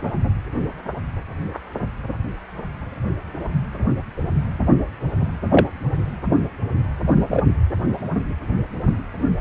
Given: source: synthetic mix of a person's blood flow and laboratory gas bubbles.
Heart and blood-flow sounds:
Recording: Doppler ultrasound of blood flow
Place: precordium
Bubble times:
0.00-0.02 s: bubbles
5.51-5.66 s: bubbles
7.31-7.44 s: bubbles
From the record:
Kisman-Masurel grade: 123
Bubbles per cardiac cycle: 1 to 2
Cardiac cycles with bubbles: 10 to 50%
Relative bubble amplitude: loud (0.450 to 0.775)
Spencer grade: 2 (many but less than half of the cardiac periods contain bubble signals, singularly or in groups)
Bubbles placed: only in the low amplitude regions of the cardiac cycle

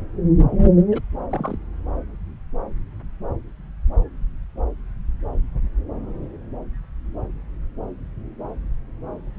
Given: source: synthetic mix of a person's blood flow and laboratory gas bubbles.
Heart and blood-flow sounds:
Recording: Doppler ultrasound of blood flow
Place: subclavian vein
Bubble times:
0.92-1.01 s: bubbles
1.30-1.57 s: bubbles
From the record:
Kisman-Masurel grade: 121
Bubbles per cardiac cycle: 1 to 2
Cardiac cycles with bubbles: 10 to 50%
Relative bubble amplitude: barely perceptible (0.100 to 0.250)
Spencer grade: 2 (many but less than half of the cardiac periods contain bubble signals, singularly or in groups)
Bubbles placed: anywhere in the cardiac cycle

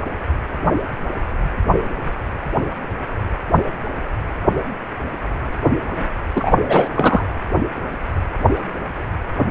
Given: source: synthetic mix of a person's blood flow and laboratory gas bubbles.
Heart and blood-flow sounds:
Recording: Doppler ultrasound of blood flow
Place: precordium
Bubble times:
6.35-6.55 s: bubbles
6.68-6.88 s: bubbles
6.95-7.24 s: bubbles
From the record:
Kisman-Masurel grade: 213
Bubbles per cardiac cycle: several, 3 to 8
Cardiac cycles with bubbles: 1 to 10%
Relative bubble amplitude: loud (0.450 to 0.775)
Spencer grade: 1 (occasional bubble signal discernible with the cardiac motion signal, with majority of cardiac periods free of bubbles)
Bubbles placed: anywhere in the cardiac cycle

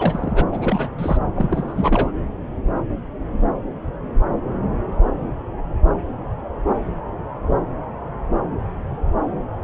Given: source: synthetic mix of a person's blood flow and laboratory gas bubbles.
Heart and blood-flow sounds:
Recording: Doppler ultrasound of blood flow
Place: subclavian vein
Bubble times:
0.00-0.44 s: bubbles
0.52-0.89 s: bubbles
0.98-1.18 s: bubbles
1.34-2.12 s: bubbles
From the record:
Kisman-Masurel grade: 222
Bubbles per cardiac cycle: several, 3 to 8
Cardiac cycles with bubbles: 10 to 50%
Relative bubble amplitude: moderate (0.250 to 0.450)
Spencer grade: 2 (many but less than half of the cardiac periods contain bubble signals, singularly or in groups)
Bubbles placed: anywhere in the cardiac cycle

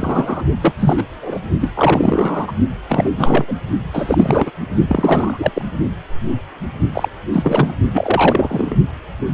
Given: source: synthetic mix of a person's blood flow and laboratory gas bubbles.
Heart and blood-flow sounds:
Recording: Doppler ultrasound of blood flow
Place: precordium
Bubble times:
0.00-0.43 s: bubbles
0.62-0.73 s: bubbles
0.79-1.03 s: bubbles
1.22-1.38 s: bubbles
1.59-1.72 s: bubbles
1.75-2.52 s: bubbles
2.88-3.10 s: bubbles
3.16-3.57 s: bubbles
3.93-4.51 s: bubbles
4.88-5.50 s: bubbles
5.55-5.62 s: bubbles
6.92-7.08 s: bubbles
7.33-7.75 s: bubbles
7.94-8.77 s: bubbles
From the record:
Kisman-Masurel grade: 333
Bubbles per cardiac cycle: rolling drumbeat, 9 or more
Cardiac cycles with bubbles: 50 to 99%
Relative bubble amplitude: loud (0.450 to 0.775)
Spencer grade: 3 (all of the cardiac periods contain showers or single bubble signals, but not dominating or overriding the cardiac motion signals)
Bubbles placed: only in the low amplitude regions of the cardiac cycle

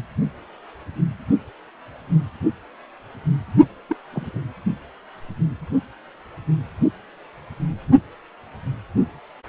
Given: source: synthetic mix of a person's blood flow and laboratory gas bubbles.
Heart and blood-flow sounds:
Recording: Doppler ultrasound of blood flow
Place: precordium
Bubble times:
3.89-3.96 s: bubbles
4.12-4.41 s: bubbles
From the record:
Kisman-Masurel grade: 111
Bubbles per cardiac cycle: 1 to 2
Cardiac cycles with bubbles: 1 to 10%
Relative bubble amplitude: barely perceptible (0.100 to 0.250)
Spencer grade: 1 (occasional bubble signal discernible with the cardiac motion signal, with majority of cardiac periods free of bubbles)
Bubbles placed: only in the low amplitude regions of the cardiac cycle

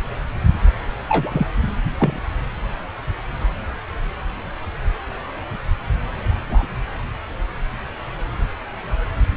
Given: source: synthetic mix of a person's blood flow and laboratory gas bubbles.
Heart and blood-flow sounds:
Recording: Doppler ultrasound of blood flow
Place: subclavian vein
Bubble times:
1.08-1.47 s: bubbles
1.99-2.20 s: bubbles
6.49-6.66 s: bubbles
From the record:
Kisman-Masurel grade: 122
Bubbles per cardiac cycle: 1 to 2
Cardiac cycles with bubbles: 10 to 50%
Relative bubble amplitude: moderate (0.250 to 0.450)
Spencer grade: 2 (many but less than half of the cardiac periods contain bubble signals, singularly or in groups)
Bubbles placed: anywhere in the cardiac cycle

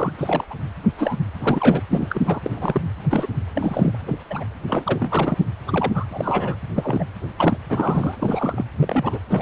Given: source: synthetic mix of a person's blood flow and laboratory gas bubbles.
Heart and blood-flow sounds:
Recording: Doppler ultrasound of blood flow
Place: precordium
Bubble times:
0.00-0.13 s: bubbles
0.18-0.45 s: bubbles
0.50-0.54 s: bubbles
0.98-1.16 s: bubbles
1.40-1.82 s: bubbles
1.91-2.06 s: bubbles
2.09-2.22 s: bubbles
2.25-2.40 s: bubbles
2.43-2.81 s: bubbles
3.10-3.27 s: bubbles
3.54-3.98 s: bubbles
4.07-4.19 s: bubbles
4.30-4.44 s: bubbles
4.67-5.38 s: bubbles
5.67-5.91 s: bubbles
5.94-6.05 s: bubbles
6.12-6.57 s: bubbles
6.75-7.04 s: bubbles
7.38-7.58 s: bubbles
7.69-8.15 s: bubbles
8.19-8.65 s: bubbles
8.80-9.19 s: bubbles
9.29-9.42 s: bubbles
From the record:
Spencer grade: 3 (all of the cardiac periods contain showers or single bubble signals, but not dominating or overriding the cardiac motion signals)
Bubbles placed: anywhere in the cardiac cycle

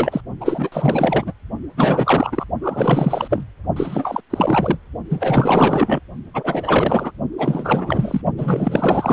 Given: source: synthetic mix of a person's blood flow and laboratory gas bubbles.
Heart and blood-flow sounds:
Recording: Doppler ultrasound of blood flow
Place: precordium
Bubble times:
0.00-0.21 s: bubbles
0.40-1.33 s: bubbles
1.77-2.45 s: bubbles
2.61-3.45 s: bubbles
3.76-4.21 s: bubbles
4.30-4.77 s: bubbles
5.09-6.00 s: bubbles
6.34-7.12 s: bubbles
7.38-8.21 s: bubbles
8.37-9.13 s: bubbles
From the record:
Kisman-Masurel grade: 444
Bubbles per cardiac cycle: continuous sound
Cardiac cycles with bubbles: 100%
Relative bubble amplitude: maximal (0.775 to 0.999)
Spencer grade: 4 (maximum detectable bubble signal sounding continuously throughout systole and diastole of every cardiac period, and overriding the amplitude of the normal cardiac signals)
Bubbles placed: only in the low amplitude regions of the cardiac cycle

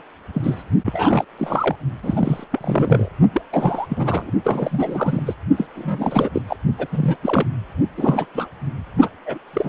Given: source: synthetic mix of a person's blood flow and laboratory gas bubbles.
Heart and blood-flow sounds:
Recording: Doppler ultrasound of blood flow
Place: precordium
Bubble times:
0.34-0.63 s: bubbles
0.86-1.25 s: bubbles
1.39-1.75 s: bubbles
2.03-2.45 s: bubbles
2.52-3.08 s: bubbles
3.33-3.42 s: bubbles
3.52-3.87 s: bubbles
3.89-4.30 s: bubbles
4.44-5.35 s: bubbles
5.57-5.66 s: bubbles
5.74-6.29 s: bubbles
6.33-6.42 s: bubbles
6.47-6.57 s: bubbles
6.78-6.87 s: bubbles
6.92-7.16 s: bubbles
7.22-7.46 s: bubbles
7.97-8.26 s: bubbles
8.35-8.47 s: bubbles
9.01-9.09 s: bubbles
9.26-9.38 s: bubbles
9.53-9.68 s: bubbles
From the record:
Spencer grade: 3 (all of the cardiac periods contain showers or single bubble signals, but not dominating or overriding the cardiac motion signals)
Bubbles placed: only in the low amplitude regions of the cardiac cycle

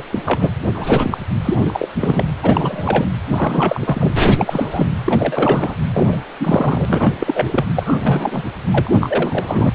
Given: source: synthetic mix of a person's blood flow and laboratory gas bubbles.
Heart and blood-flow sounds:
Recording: Doppler ultrasound of blood flow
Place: precordium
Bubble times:
0.00-0.04 s: bubbles
0.12-0.19 s: bubbles
0.25-0.50 s: bubbles
0.68-0.71 s: bubbles
0.74-1.18 s: bubbles
1.45-1.55 s: bubbles
1.61-1.88 s: bubbles
1.99-2.25 s: bubbles
2.42-3.05 s: bubbles
3.29-4.12 s: bubbles
4.26-4.88 s: bubbles
5.05-5.75 s: bubbles
5.93-6.21 s: bubbles
6.39-7.65 s: bubbles
7.75-8.43 s: bubbles
8.71-8.90 s: bubbles
9.00-9.70 s: bubbles
From the record:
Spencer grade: 3 (all of the cardiac periods contain showers or single bubble signals, but not dominating or overriding the cardiac motion signals)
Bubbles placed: anywhere in the cardiac cycle

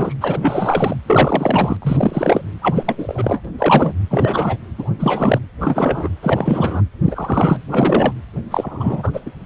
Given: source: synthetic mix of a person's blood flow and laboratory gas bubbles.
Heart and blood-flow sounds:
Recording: Doppler ultrasound of blood flow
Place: precordium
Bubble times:
0.00-0.14 s: bubbles
0.20-0.95 s: bubbles
1.07-1.77 s: bubbles
1.82-2.42 s: bubbles
2.62-2.95 s: bubbles
2.98-3.41 s: bubbles
3.45-3.50 s: bubbles
3.58-3.92 s: bubbles
4.10-4.57 s: bubbles
4.78-4.91 s: bubbles
4.99-5.39 s: bubbles
5.61-6.09 s: bubbles
6.23-6.83 s: bubbles
7.04-7.61 s: bubbles
7.70-8.13 s: bubbles
8.50-9.20 s: bubbles
9.26-9.31 s: bubbles
From the record:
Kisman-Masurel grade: 343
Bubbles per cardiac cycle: rolling drumbeat, 9 or more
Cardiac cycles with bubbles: 100%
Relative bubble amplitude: loud (0.450 to 0.775)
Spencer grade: 3 (all of the cardiac periods contain showers or single bubble signals, but not dominating or overriding the cardiac motion signals)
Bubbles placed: anywhere in the cardiac cycle

